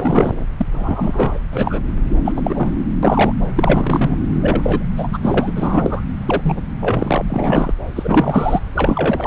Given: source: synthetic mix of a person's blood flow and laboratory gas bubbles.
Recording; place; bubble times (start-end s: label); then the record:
Doppler ultrasound of blood flow; subclavian vein
0.00-0.46 s: bubbles
0.57-0.66 s: bubbles
0.72-1.40 s: bubbles
1.53-1.80 s: bubbles
2.25-2.33 s: bubbles
2.36-2.71 s: bubbles
3.02-3.32 s: bubbles
3.55-4.16 s: bubbles
4.41-4.85 s: bubbles
4.96-5.18 s: bubbles
5.22-5.51 s: bubbles
5.55-6.02 s: bubbles
6.26-6.62 s: bubbles
6.80-7.24 s: bubbles
7.29-7.73 s: bubbles
7.95-8.59 s: bubbles
8.75-9.27 s: bubbles
From the record:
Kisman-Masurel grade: 243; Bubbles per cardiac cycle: several, 3 to 8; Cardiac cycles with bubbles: 100%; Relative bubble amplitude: loud (0.450 to 0.775); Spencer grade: 3 (all of the cardiac periods contain showers or single bubble signals, but not dominating or overriding the cardiac motion signals); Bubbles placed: anywhere in the cardiac cycle